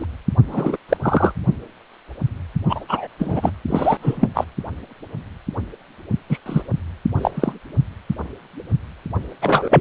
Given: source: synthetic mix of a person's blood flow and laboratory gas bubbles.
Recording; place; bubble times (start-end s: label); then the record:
Doppler ultrasound of blood flow; precordium
0.00-0.05 s: bubbles
0.47-0.77 s: bubbles
0.89-0.97 s: bubbles
1.02-1.32 s: bubbles
2.69-2.84 s: bubbles
2.88-3.07 s: bubbles
3.19-3.50 s: bubbles
3.67-3.97 s: bubbles
4.02-4.29 s: bubbles
4.34-4.45 s: bubbles
6.29-6.39 s: bubbles
6.46-6.62 s: bubbles
7.17-7.31 s: bubbles
7.34-7.53 s: bubbles
9.41-9.81 s: bubbles
From the record:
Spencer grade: 3 (all of the cardiac periods contain showers or single bubble signals, but not dominating or overriding the cardiac motion signals); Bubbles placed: only in the low amplitude regions of the cardiac cycle